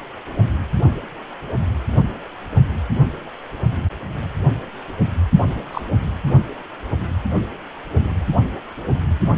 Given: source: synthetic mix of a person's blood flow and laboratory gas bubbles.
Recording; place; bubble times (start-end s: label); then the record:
Doppler ultrasound of blood flow; precordium
5.72-5.81 s: bubbles
From the record:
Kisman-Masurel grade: 112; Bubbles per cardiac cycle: 1 to 2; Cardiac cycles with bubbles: 1 to 10%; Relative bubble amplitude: moderate (0.250 to 0.450); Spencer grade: 1 (occasional bubble signal discernible with the cardiac motion signal, with majority of cardiac periods free of bubbles); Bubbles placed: anywhere in the cardiac cycle